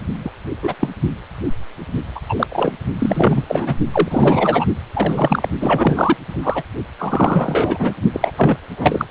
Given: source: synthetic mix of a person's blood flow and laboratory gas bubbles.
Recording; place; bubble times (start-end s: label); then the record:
Doppler ultrasound of blood flow; precordium
0.24-0.30 s: bubbles
0.62-0.74 s: bubbles
0.79-0.88 s: bubbles
2.15-2.20 s: bubbles
2.28-2.35 s: bubbles
2.38-2.47 s: bubbles
2.51-2.75 s: bubbles
2.99-3.44 s: bubbles
3.48-3.75 s: bubbles
3.92-4.66 s: bubbles
4.93-5.49 s: bubbles
5.60-6.17 s: bubbles
6.29-6.64 s: bubbles
6.98-7.92 s: bubbles
8.13-8.32 s: bubbles
8.36-8.56 s: bubbles
8.76-9.05 s: bubbles
From the record:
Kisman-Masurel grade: 233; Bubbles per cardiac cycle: several, 3 to 8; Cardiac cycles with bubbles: 50 to 99%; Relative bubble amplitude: loud (0.450 to 0.775); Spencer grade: 3 (all of the cardiac periods contain showers or single bubble signals, but not dominating or overriding the cardiac motion signals); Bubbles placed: only in the low amplitude regions of the cardiac cycle